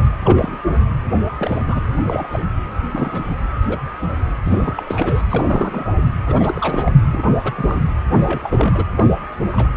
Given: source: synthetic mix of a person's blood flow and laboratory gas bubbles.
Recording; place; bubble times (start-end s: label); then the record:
Doppler ultrasound of blood flow; precordium
0.00-0.03 s: bubbles
0.24-0.58 s: bubbles
1.38-1.58 s: bubbles
1.68-1.80 s: bubbles
1.96-2.28 s: bubbles
2.31-2.40 s: bubbles
2.90-3.34 s: bubbles
3.61-3.79 s: bubbles
4.02-4.07 s: bubbles
4.45-4.83 s: bubbles
4.87-5.23 s: bubbles
5.30-5.85 s: bubbles
6.26-6.92 s: bubbles
7.12-7.32 s: bubbles
7.43-7.81 s: bubbles
8.10-8.84 s: bubbles
8.96-9.04 s: bubbles
9.50-9.67 s: bubbles
From the record:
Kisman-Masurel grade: 242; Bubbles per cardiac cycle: several, 3 to 8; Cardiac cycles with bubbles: 100%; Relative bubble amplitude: moderate (0.250 to 0.450); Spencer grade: 3 (all of the cardiac periods contain showers or single bubble signals, but not dominating or overriding the cardiac motion signals); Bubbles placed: anywhere in the cardiac cycle